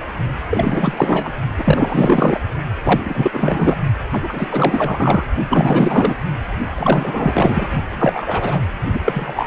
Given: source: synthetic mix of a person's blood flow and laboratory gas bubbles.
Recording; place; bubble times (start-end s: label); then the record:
Doppler ultrasound of blood flow; precordium
0.50-1.31 s: bubbles
1.58-2.41 s: bubbles
2.83-3.77 s: bubbles
4.12-4.19 s: bubbles
4.22-5.26 s: bubbles
5.49-6.14 s: bubbles
6.75-7.67 s: bubbles
7.94-8.61 s: bubbles
8.93-9.47 s: bubbles
From the record:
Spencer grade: 4 (maximum detectable bubble signal sounding continuously throughout systole and diastole of every cardiac period, and overriding the amplitude of the normal cardiac signals); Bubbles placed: only in the low amplitude regions of the cardiac cycle